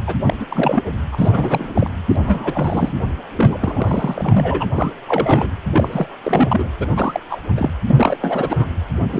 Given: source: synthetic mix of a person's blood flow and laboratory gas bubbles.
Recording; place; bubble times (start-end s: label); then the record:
Doppler ultrasound of blood flow; precordium
0.07-0.15 s: bubbles
0.26-0.36 s: bubbles
0.39-0.45 s: bubbles
0.48-0.84 s: bubbles
1.11-1.90 s: bubbles
2.08-2.16 s: bubbles
2.21-2.93 s: bubbles
3.36-3.58 s: bubbles
3.60-4.67 s: bubbles
4.74-4.92 s: bubbles
5.08-5.49 s: bubbles
5.72-6.07 s: bubbles
6.23-6.71 s: bubbles
6.79-6.87 s: bubbles
6.96-7.20 s: bubbles
7.29-7.41 s: bubbles
7.56-7.70 s: bubbles
7.87-8.17 s: bubbles
8.21-8.66 s: bubbles
9.12-9.20 s: bubbles
From the record:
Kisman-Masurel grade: 342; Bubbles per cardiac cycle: rolling drumbeat, 9 or more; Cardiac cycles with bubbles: 100%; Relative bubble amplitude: moderate (0.250 to 0.450); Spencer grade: 3 (all of the cardiac periods contain showers or single bubble signals, but not dominating or overriding the cardiac motion signals); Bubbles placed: anywhere in the cardiac cycle